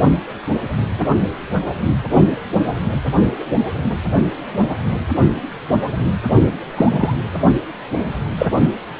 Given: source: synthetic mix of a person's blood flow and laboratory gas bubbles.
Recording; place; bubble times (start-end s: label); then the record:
Doppler ultrasound of blood flow; precordium
6.75-7.14 s: bubbles
8.38-8.46 s: bubbles
From the record:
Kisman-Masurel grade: 123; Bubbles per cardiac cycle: 1 to 2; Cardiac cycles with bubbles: 10 to 50%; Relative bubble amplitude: loud (0.450 to 0.775); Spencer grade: 2 (many but less than half of the cardiac periods contain bubble signals, singularly or in groups); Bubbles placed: only in the low amplitude regions of the cardiac cycle